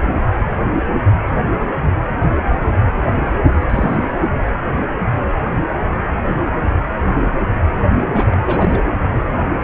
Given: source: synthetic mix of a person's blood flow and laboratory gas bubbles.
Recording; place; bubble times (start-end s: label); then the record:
Doppler ultrasound of blood flow; precordium
3.48-3.65 s: bubbles
3.69-4.13 s: bubbles
8.12-8.78 s: bubbles
From the record:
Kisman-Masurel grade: 212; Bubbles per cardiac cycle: several, 3 to 8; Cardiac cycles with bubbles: 1 to 10%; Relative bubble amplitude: moderate (0.250 to 0.450); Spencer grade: 1 (occasional bubble signal discernible with the cardiac motion signal, with majority of cardiac periods free of bubbles); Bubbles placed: anywhere in the cardiac cycle